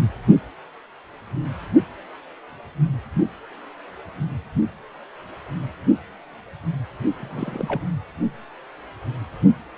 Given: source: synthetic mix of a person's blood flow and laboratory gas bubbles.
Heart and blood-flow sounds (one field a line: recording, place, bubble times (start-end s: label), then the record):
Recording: Doppler ultrasound of blood flow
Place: precordium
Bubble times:
7.17-7.82 s: bubbles
From the record:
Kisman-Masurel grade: 221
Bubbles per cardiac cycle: several, 3 to 8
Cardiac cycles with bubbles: 10 to 50%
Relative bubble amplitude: barely perceptible (0.100 to 0.250)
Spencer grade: 2 (many but less than half of the cardiac periods contain bubble signals, singularly or in groups)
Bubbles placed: only in the low amplitude regions of the cardiac cycle